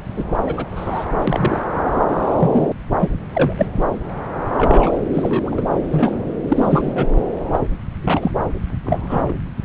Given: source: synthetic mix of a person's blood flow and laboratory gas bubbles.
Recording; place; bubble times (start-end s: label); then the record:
Doppler ultrasound of blood flow; subclavian vein
0.17-0.25 s: bubbles
0.46-0.70 s: bubbles
0.75-1.05 s: bubbles
1.27-1.60 s: bubbles
2.39-2.68 s: bubbles
3.00-3.09 s: bubbles
3.33-3.53 s: bubbles
3.58-3.69 s: bubbles
4.54-4.97 s: bubbles
5.13-5.62 s: bubbles
5.91-6.26 s: bubbles
6.48-7.05 s: bubbles
7.52-7.59 s: bubbles
8.02-8.31 s: bubbles
8.84-9.33 s: bubbles
From the record:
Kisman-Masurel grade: 242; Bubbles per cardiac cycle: several, 3 to 8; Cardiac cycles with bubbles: 100%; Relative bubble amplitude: moderate (0.250 to 0.450); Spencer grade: 3 (all of the cardiac periods contain showers or single bubble signals, but not dominating or overriding the cardiac motion signals); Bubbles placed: anywhere in the cardiac cycle